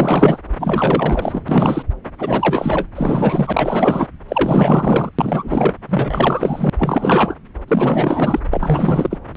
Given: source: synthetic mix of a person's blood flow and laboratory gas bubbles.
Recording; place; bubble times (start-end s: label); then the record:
Doppler ultrasound of blood flow; subclavian vein
0.00-0.40 s: bubbles
0.58-1.42 s: bubbles
1.48-1.82 s: bubbles
2.20-2.88 s: bubbles
2.95-4.07 s: bubbles
4.28-5.11 s: bubbles
5.18-5.74 s: bubbles
5.89-6.70 s: bubbles
6.79-7.35 s: bubbles
7.67-8.40 s: bubbles
8.53-9.18 s: bubbles
9.35-9.37 s: bubbles
From the record:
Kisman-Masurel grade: 444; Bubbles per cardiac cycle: continuous sound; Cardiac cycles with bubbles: 100%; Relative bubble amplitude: maximal (0.775 to 0.999); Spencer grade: 4 (maximum detectable bubble signal sounding continuously throughout systole and diastole of every cardiac period, and overriding the amplitude of the normal cardiac signals); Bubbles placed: anywhere in the cardiac cycle